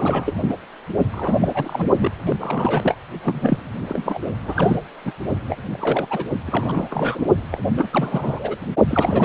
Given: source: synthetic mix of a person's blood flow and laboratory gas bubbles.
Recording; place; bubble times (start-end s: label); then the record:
Doppler ultrasound of blood flow; precordium
0.00-0.35 s: bubbles
0.42-0.54 s: bubbles
1.11-1.37 s: bubbles
1.41-1.88 s: bubbles
1.98-2.11 s: bubbles
2.26-2.36 s: bubbles
2.40-2.96 s: bubbles
3.23-3.71 s: bubbles
3.89-4.20 s: bubbles
4.46-4.79 s: bubbles
5.04-5.11 s: bubbles
5.49-5.56 s: bubbles
5.72-6.24 s: bubbles
6.34-6.38 s: bubbles
6.46-7.28 s: bubbles
7.52-7.60 s: bubbles
7.77-7.88 s: bubbles
7.91-8.57 s: bubbles
8.88-9.25 s: bubbles
From the record:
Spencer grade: 3 (all of the cardiac periods contain showers or single bubble signals, but not dominating or overriding the cardiac motion signals); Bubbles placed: only in the low amplitude regions of the cardiac cycle